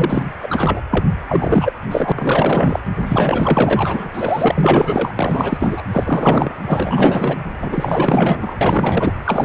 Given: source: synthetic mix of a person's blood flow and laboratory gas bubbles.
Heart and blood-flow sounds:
Doppler ultrasound of blood flow; precordium
0.00-0.24 s: bubbles
0.42-0.82 s: bubbles
0.90-1.04 s: bubbles
1.27-1.73 s: bubbles
1.90-2.12 s: bubbles
2.15-2.79 s: bubbles
3.05-4.08 s: bubbles
4.14-5.11 s: bubbles
5.16-5.83 s: bubbles
5.92-6.53 s: bubbles
6.66-7.37 s: bubbles
7.60-8.58 s: bubbles
8.61-9.12 s: bubbles
9.25-9.45 s: bubbles
From the record:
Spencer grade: 4 (maximum detectable bubble signal sounding continuously throughout systole and diastole of every cardiac period, and overriding the amplitude of the normal cardiac signals); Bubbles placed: anywhere in the cardiac cycle

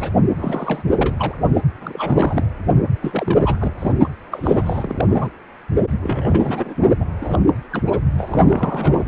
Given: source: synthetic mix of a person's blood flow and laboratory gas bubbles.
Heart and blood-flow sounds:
Doppler ultrasound of blood flow; precordium
0.00-0.10 s: bubbles
0.36-0.83 s: bubbles
0.91-1.15 s: bubbles
1.19-1.34 s: bubbles
1.54-1.61 s: bubbles
1.81-2.44 s: bubbles
3.02-3.73 s: bubbles
3.79-3.92 s: bubbles
4.03-4.08 s: bubbles
4.32-5.06 s: bubbles
5.08-5.30 s: bubbles
6.00-6.75 s: bubbles
6.80-6.86 s: bubbles
7.00-7.04 s: bubbles
7.21-7.38 s: bubbles
7.47-7.54 s: bubbles
7.72-7.83 s: bubbles
7.86-8.00 s: bubbles
8.17-9.08 s: bubbles
From the record:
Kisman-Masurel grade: 342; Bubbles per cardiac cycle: rolling drumbeat, 9 or more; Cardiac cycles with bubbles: 100%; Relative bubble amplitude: moderate (0.250 to 0.450); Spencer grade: 3 (all of the cardiac periods contain showers or single bubble signals, but not dominating or overriding the cardiac motion signals); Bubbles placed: only in the low amplitude regions of the cardiac cycle

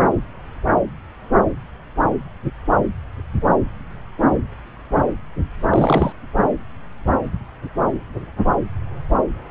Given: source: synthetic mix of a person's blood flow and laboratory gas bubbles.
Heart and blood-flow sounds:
Doppler ultrasound of blood flow; subclavian vein
5.61-6.12 s: bubbles
From the record:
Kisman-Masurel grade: 212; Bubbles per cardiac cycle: several, 3 to 8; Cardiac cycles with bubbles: 1 to 10%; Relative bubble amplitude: moderate (0.250 to 0.450); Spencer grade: 1 (occasional bubble signal discernible with the cardiac motion signal, with majority of cardiac periods free of bubbles); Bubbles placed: anywhere in the cardiac cycle

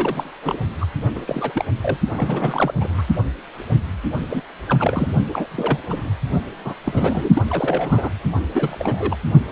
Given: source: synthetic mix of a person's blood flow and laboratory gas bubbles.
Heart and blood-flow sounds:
Doppler ultrasound of blood flow; precordium
0.00-0.39 s: bubbles
0.43-0.58 s: bubbles
0.80-0.86 s: bubbles
1.15-1.24 s: bubbles
1.27-1.65 s: bubbles
1.83-1.97 s: bubbles
2.16-2.74 s: bubbles
2.81-3.02 s: bubbles
4.30-4.42 s: bubbles
4.68-5.08 s: bubbles
5.25-5.47 s: bubbles
5.51-5.80 s: bubbles
5.89-6.10 s: bubbles
6.64-6.74 s: bubbles
6.84-7.29 s: bubbles
7.33-7.42 s: bubbles
7.50-8.10 s: bubbles
8.54-9.16 s: bubbles
From the record:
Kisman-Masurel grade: 332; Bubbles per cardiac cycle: rolling drumbeat, 9 or more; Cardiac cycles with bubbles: 50 to 99%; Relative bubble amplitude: moderate (0.250 to 0.450); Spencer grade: 3 (all of the cardiac periods contain showers or single bubble signals, but not dominating or overriding the cardiac motion signals); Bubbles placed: only in the low amplitude regions of the cardiac cycle

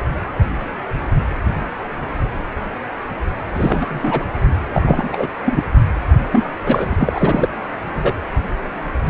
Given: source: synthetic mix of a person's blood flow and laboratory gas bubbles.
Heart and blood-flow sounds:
Doppler ultrasound of blood flow; precordium
3.54-4.25 s: bubbles
4.73-5.27 s: bubbles
5.46-5.62 s: bubbles
6.32-6.44 s: bubbles
6.65-7.48 s: bubbles
7.96-8.13 s: bubbles
From the record:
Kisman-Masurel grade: 223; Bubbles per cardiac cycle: several, 3 to 8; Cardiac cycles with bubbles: 10 to 50%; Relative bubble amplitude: loud (0.450 to 0.775); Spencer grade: 2 (many but less than half of the cardiac periods contain bubble signals, singularly or in groups); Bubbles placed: anywhere in the cardiac cycle

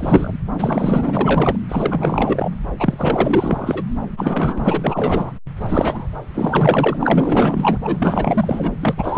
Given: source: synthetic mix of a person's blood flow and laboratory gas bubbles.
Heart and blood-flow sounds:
Doppler ultrasound of blood flow; subclavian vein
0.00-0.33 s: bubbles
0.60-1.56 s: bubbles
1.69-2.51 s: bubbles
2.78-3.84 s: bubbles
4.17-5.32 s: bubbles
5.58-6.08 s: bubbles
6.34-6.97 s: bubbles
7.01-7.78 s: bubbles
7.84-8.71 s: bubbles
8.80-9.18 s: bubbles
From the record:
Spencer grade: 4 (maximum detectable bubble signal sounding continuously throughout systole and diastole of every cardiac period, and overriding the amplitude of the normal cardiac signals); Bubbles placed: anywhere in the cardiac cycle

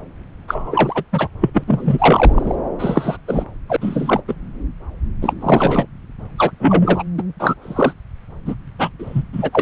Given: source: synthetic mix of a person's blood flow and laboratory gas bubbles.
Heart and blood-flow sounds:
Doppler ultrasound of blood flow; subclavian vein
0.47-1.03 s: bubbles
1.12-1.28 s: bubbles
1.41-1.50 s: bubbles
1.54-1.64 s: bubbles
1.67-2.55 s: bubbles
2.78-3.17 s: bubbles
3.27-3.45 s: bubbles
3.69-3.76 s: bubbles
3.81-4.21 s: bubbles
4.28-4.35 s: bubbles
5.21-5.33 s: bubbles
5.41-5.87 s: bubbles
6.38-6.52 s: bubbles
6.60-7.03 s: bubbles
7.19-7.24 s: bubbles
7.40-7.55 s: bubbles
7.62-7.93 s: bubbles
8.45-8.55 s: bubbles
8.79-8.89 s: bubbles
8.99-9.23 s: bubbles
9.32-9.62 s: bubbles
From the record:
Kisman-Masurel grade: 243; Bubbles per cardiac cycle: several, 3 to 8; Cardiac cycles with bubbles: 100%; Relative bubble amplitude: loud (0.450 to 0.775); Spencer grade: 3 (all of the cardiac periods contain showers or single bubble signals, but not dominating or overriding the cardiac motion signals); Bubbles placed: anywhere in the cardiac cycle

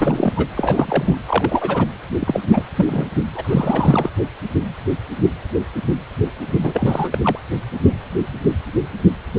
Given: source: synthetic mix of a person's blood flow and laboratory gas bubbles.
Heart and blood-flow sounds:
Doppler ultrasound of blood flow; precordium
0.00-0.33 s: bubbles
0.35-0.46 s: bubbles
0.56-1.15 s: bubbles
1.27-1.86 s: bubbles
2.19-2.40 s: bubbles
2.52-2.62 s: bubbles
2.75-3.05 s: bubbles
3.35-4.10 s: bubbles
6.62-7.19 s: bubbles
7.24-7.39 s: bubbles
From the record:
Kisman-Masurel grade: 332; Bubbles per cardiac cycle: rolling drumbeat, 9 or more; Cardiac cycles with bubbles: 50 to 99%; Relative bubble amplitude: moderate (0.250 to 0.450); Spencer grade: 3 (all of the cardiac periods contain showers or single bubble signals, but not dominating or overriding the cardiac motion signals); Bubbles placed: anywhere in the cardiac cycle

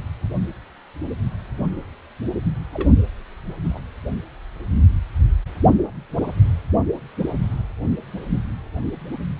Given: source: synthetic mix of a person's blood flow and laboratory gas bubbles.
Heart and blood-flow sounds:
Doppler ultrasound of blood flow; precordium
2.73-2.89 s: bubbles
3.64-3.80 s: bubbles
From the record:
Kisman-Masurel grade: 111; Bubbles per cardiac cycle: 1 to 2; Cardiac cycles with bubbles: 1 to 10%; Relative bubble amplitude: barely perceptible (0.100 to 0.250); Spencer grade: 1 (occasional bubble signal discernible with the cardiac motion signal, with majority of cardiac periods free of bubbles); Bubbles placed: anywhere in the cardiac cycle

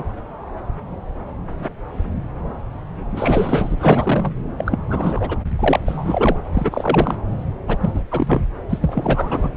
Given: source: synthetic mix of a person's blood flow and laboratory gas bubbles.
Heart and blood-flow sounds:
Doppler ultrasound of blood flow; subclavian vein
0.00-0.04 s: bubbles
3.10-3.76 s: bubbles
3.79-4.34 s: bubbles
4.58-4.83 s: bubbles
4.88-5.37 s: bubbles
5.55-5.80 s: bubbles
5.86-6.37 s: bubbles
6.53-7.14 s: bubbles
7.67-7.77 s: bubbles
7.80-8.01 s: bubbles
8.11-8.42 s: bubbles
8.69-8.79 s: bubbles
8.81-9.50 s: bubbles
From the record:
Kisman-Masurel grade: 333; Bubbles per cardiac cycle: rolling drumbeat, 9 or more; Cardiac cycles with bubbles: 50 to 99%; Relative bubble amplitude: loud (0.450 to 0.775); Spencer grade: 3 (all of the cardiac periods contain showers or single bubble signals, but not dominating or overriding the cardiac motion signals); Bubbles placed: anywhere in the cardiac cycle

